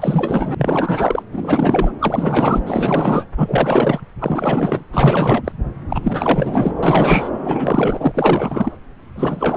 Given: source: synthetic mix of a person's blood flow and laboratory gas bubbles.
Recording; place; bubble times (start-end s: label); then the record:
Doppler ultrasound of blood flow; subclavian vein
0.00-1.23 s: bubbles
1.32-1.93 s: bubbles
1.99-2.62 s: bubbles
2.66-3.26 s: bubbles
3.37-4.00 s: bubbles
4.20-4.84 s: bubbles
4.92-5.52 s: bubbles
5.88-6.00 s: bubbles
6.03-6.73 s: bubbles
6.83-7.29 s: bubbles
7.44-8.77 s: bubbles
9.15-9.56 s: bubbles
From the record:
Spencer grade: 4 (maximum detectable bubble signal sounding continuously throughout systole and diastole of every cardiac period, and overriding the amplitude of the normal cardiac signals); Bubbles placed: anywhere in the cardiac cycle